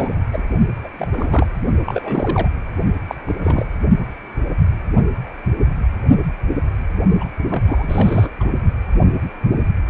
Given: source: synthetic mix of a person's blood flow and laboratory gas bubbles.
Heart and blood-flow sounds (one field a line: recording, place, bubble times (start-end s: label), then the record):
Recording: Doppler ultrasound of blood flow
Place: precordium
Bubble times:
0.00-0.26 s: bubbles
0.32-0.43 s: bubbles
0.83-0.88 s: bubbles
0.98-1.08 s: bubbles
1.12-1.47 s: bubbles
1.85-2.49 s: bubbles
3.08-3.15 s: bubbles
3.26-3.66 s: bubbles
7.20-7.30 s: bubbles
7.50-7.62 s: bubbles
7.65-8.29 s: bubbles
8.40-8.49 s: bubbles
From the record:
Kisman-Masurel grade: 232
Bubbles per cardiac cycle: several, 3 to 8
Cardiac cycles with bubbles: 50 to 99%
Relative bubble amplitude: moderate (0.250 to 0.450)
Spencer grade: 3 (all of the cardiac periods contain showers or single bubble signals, but not dominating or overriding the cardiac motion signals)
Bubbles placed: only in the low amplitude regions of the cardiac cycle